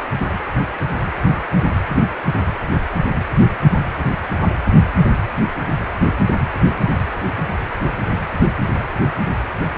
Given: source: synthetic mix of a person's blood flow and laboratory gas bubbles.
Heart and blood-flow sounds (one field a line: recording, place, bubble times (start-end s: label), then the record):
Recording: Doppler ultrasound of blood flow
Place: precordium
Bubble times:
no bubbles
From the record:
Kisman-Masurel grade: 000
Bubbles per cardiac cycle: 0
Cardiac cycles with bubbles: 0%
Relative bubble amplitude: no bubbles discernible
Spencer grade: 0 (complete lack of bubble signals)